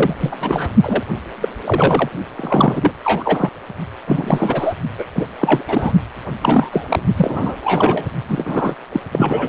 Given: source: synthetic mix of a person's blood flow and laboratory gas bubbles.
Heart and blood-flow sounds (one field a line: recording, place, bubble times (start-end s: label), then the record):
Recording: Doppler ultrasound of blood flow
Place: precordium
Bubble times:
0.00-0.15 s: bubbles
0.20-0.36 s: bubbles
0.41-0.70 s: bubbles
0.82-1.03 s: bubbles
1.41-1.48 s: bubbles
1.64-2.10 s: bubbles
2.36-2.92 s: bubbles
3.02-3.50 s: bubbles
4.06-4.75 s: bubbles
4.98-5.05 s: bubbles
5.15-5.28 s: bubbles
5.39-5.63 s: bubbles
5.67-5.92 s: bubbles
6.41-6.69 s: bubbles
6.72-6.84 s: bubbles
6.88-7.00 s: bubbles
7.16-7.56 s: bubbles
7.64-8.04 s: bubbles
8.28-8.76 s: bubbles
8.92-9.00 s: bubbles
9.12-9.49 s: bubbles
From the record:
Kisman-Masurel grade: 343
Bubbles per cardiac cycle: rolling drumbeat, 9 or more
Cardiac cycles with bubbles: 100%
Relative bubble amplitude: loud (0.450 to 0.775)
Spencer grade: 3 (all of the cardiac periods contain showers or single bubble signals, but not dominating or overriding the cardiac motion signals)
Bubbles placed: only in the low amplitude regions of the cardiac cycle